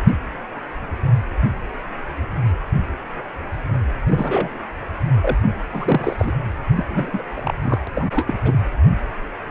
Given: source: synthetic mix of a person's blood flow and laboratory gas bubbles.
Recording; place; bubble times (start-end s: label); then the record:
Doppler ultrasound of blood flow; precordium
4.08-4.50 s: bubbles
5.22-5.37 s: bubbles
5.70-6.16 s: bubbles
6.19-6.33 s: bubbles
6.76-6.86 s: bubbles
6.90-7.23 s: bubbles
7.36-7.54 s: bubbles
7.62-7.78 s: bubbles
7.95-8.08 s: bubbles
8.11-8.38 s: bubbles
8.45-8.58 s: bubbles
From the record:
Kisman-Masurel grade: 222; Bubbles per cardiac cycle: several, 3 to 8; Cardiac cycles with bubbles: 10 to 50%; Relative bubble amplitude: moderate (0.250 to 0.450); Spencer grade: 2 (many but less than half of the cardiac periods contain bubble signals, singularly or in groups); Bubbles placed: anywhere in the cardiac cycle